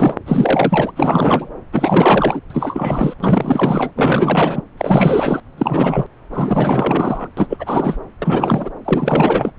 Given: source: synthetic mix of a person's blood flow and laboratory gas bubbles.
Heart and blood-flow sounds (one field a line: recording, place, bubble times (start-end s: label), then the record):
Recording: Doppler ultrasound of blood flow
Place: subclavian vein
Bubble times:
0.00-0.15 s: bubbles
0.26-0.91 s: bubbles
0.96-1.50 s: bubbles
1.73-2.40 s: bubbles
2.50-3.14 s: bubbles
3.20-3.91 s: bubbles
3.96-4.62 s: bubbles
4.78-5.40 s: bubbles
5.58-6.06 s: bubbles
6.33-7.28 s: bubbles
7.37-7.98 s: bubbles
8.21-8.69 s: bubbles
8.84-9.51 s: bubbles
From the record:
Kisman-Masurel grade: 444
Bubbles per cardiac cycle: continuous sound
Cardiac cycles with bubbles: 100%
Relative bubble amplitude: maximal (0.775 to 0.999)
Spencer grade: 4 (maximum detectable bubble signal sounding continuously throughout systole and diastole of every cardiac period, and overriding the amplitude of the normal cardiac signals)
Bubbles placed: anywhere in the cardiac cycle